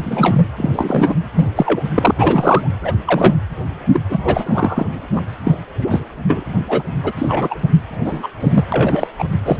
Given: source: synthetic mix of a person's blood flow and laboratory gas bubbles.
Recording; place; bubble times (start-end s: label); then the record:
Doppler ultrasound of blood flow; precordium
0.00-0.46 s: bubbles
0.56-1.15 s: bubbles
1.34-1.48 s: bubbles
1.55-1.83 s: bubbles
1.95-2.13 s: bubbles
2.17-2.69 s: bubbles
2.81-2.92 s: bubbles
3.05-3.34 s: bubbles
3.93-4.00 s: bubbles
4.09-4.86 s: bubbles
5.14-5.23 s: bubbles
5.43-5.57 s: bubbles
5.81-6.03 s: bubbles
6.28-6.45 s: bubbles
6.68-6.83 s: bubbles
7.03-7.12 s: bubbles
7.16-7.59 s: bubbles
8.04-8.29 s: bubbles
8.40-8.65 s: bubbles
8.72-9.07 s: bubbles
9.18-9.24 s: bubbles
9.45-9.60 s: bubbles
From the record:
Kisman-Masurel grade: 243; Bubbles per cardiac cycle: several, 3 to 8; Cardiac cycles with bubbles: 100%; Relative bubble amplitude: loud (0.450 to 0.775); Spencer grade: 3 (all of the cardiac periods contain showers or single bubble signals, but not dominating or overriding the cardiac motion signals); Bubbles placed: anywhere in the cardiac cycle